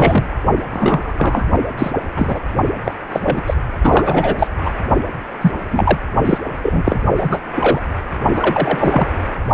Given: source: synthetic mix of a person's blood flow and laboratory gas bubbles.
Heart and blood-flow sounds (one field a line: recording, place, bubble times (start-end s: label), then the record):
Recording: Doppler ultrasound of blood flow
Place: precordium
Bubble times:
0.00-0.28 s: bubbles
0.71-1.46 s: bubbles
1.77-1.91 s: bubbles
2.16-2.40 s: bubbles
2.85-2.96 s: bubbles
3.10-3.42 s: bubbles
3.46-3.54 s: bubbles
3.82-4.36 s: bubbles
4.38-4.47 s: bubbles
4.64-4.74 s: bubbles
5.41-5.51 s: bubbles
5.71-5.98 s: bubbles
6.25-6.38 s: bubbles
6.62-6.98 s: bubbles
7.13-7.40 s: bubbles
7.55-7.81 s: bubbles
8.35-9.07 s: bubbles
From the record:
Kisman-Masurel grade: 243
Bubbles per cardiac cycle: several, 3 to 8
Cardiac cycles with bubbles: 100%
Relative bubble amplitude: loud (0.450 to 0.775)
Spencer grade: 3 (all of the cardiac periods contain showers or single bubble signals, but not dominating or overriding the cardiac motion signals)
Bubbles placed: only in the low amplitude regions of the cardiac cycle